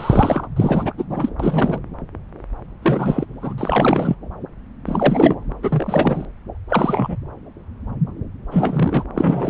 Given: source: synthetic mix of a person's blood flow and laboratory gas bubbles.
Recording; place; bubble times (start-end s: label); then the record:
Doppler ultrasound of blood flow; subclavian vein
0.00-0.47 s: bubbles
0.56-0.92 s: bubbles
0.97-1.04 s: bubbles
1.10-1.29 s: bubbles
1.40-1.78 s: bubbles
2.82-3.25 s: bubbles
3.42-3.54 s: bubbles
3.58-4.15 s: bubbles
4.85-5.35 s: bubbles
5.62-6.26 s: bubbles
6.69-7.17 s: bubbles
8.51-9.04 s: bubbles
9.14-9.50 s: bubbles
From the record:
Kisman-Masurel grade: 333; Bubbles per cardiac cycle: rolling drumbeat, 9 or more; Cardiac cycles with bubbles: 50 to 99%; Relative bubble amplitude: loud (0.450 to 0.775); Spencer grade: 3 (all of the cardiac periods contain showers or single bubble signals, but not dominating or overriding the cardiac motion signals); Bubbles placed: anywhere in the cardiac cycle